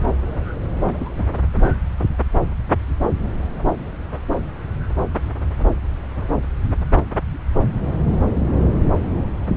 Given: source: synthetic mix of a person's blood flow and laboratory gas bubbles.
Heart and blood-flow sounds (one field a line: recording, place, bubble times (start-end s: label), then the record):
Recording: Doppler ultrasound of blood flow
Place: subclavian vein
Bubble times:
0.84-1.10 s: bubbles
1.18-1.25 s: bubbles
From the record:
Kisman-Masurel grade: 112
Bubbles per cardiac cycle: 1 to 2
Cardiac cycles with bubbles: 1 to 10%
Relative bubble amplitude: moderate (0.250 to 0.450)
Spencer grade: 1 (occasional bubble signal discernible with the cardiac motion signal, with majority of cardiac periods free of bubbles)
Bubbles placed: anywhere in the cardiac cycle